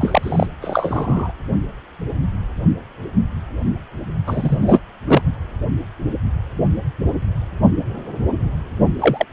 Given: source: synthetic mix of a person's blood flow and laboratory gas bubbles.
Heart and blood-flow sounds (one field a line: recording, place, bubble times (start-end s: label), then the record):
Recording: Doppler ultrasound of blood flow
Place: precordium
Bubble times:
0.00-0.47 s: bubbles
0.61-1.32 s: bubbles
4.26-4.79 s: bubbles
5.07-5.21 s: bubbles
8.99-9.24 s: bubbles
From the record:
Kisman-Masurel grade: 223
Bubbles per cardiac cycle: several, 3 to 8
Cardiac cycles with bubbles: 10 to 50%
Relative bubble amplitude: loud (0.450 to 0.775)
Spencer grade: 2 (many but less than half of the cardiac periods contain bubble signals, singularly or in groups)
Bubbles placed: only in the low amplitude regions of the cardiac cycle